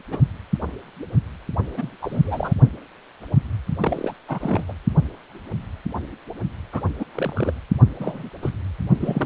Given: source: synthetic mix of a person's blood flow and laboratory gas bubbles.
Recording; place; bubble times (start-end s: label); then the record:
Doppler ultrasound of blood flow; precordium
0.10-0.20 s: bubbles
1.76-1.90 s: bubbles
2.01-2.54 s: bubbles
3.80-4.14 s: bubbles
4.28-4.65 s: bubbles
4.67-4.73 s: bubbles
6.72-6.81 s: bubbles
6.99-7.04 s: bubbles
7.12-7.53 s: bubbles
8.00-8.29 s: bubbles
8.42-8.50 s: bubbles
9.00-9.26 s: bubbles
From the record:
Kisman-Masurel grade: 232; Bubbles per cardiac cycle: several, 3 to 8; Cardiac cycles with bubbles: 50 to 99%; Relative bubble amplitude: moderate (0.250 to 0.450); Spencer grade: 3 (all of the cardiac periods contain showers or single bubble signals, but not dominating or overriding the cardiac motion signals); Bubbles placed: only in the low amplitude regions of the cardiac cycle